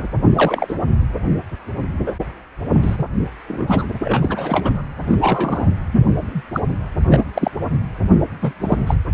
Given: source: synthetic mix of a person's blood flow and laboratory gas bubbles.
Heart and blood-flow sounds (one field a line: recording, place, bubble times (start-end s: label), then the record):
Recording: Doppler ultrasound of blood flow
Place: precordium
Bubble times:
0.00-0.08 s: bubbles
0.35-0.74 s: bubbles
2.06-2.12 s: bubbles
2.81-3.04 s: bubbles
3.48-3.86 s: bubbles
4.01-4.82 s: bubbles
5.06-5.17 s: bubbles
5.21-5.68 s: bubbles
5.92-6.06 s: bubbles
6.15-6.42 s: bubbles
6.53-6.61 s: bubbles
6.69-6.74 s: bubbles
7.04-7.27 s: bubbles
7.34-7.51 s: bubbles
8.42-8.52 s: bubbles
8.60-8.77 s: bubbles
8.87-8.95 s: bubbles
From the record:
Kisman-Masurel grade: 242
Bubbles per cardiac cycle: several, 3 to 8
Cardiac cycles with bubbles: 100%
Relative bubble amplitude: moderate (0.250 to 0.450)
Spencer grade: 3 (all of the cardiac periods contain showers or single bubble signals, but not dominating or overriding the cardiac motion signals)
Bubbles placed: anywhere in the cardiac cycle